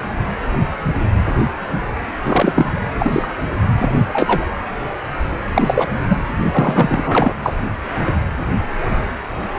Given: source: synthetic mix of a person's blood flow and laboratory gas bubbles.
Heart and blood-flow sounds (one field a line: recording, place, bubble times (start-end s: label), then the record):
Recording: Doppler ultrasound of blood flow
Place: precordium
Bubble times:
2.24-2.80 s: bubbles
2.99-3.28 s: bubbles
3.78-3.95 s: bubbles
4.08-4.46 s: bubbles
5.54-5.89 s: bubbles
6.08-6.17 s: bubbles
6.52-7.34 s: bubbles
7.42-7.54 s: bubbles
From the record:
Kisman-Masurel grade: 233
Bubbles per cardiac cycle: several, 3 to 8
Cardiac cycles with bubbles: 50 to 99%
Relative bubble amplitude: loud (0.450 to 0.775)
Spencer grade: 3 (all of the cardiac periods contain showers or single bubble signals, but not dominating or overriding the cardiac motion signals)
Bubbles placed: anywhere in the cardiac cycle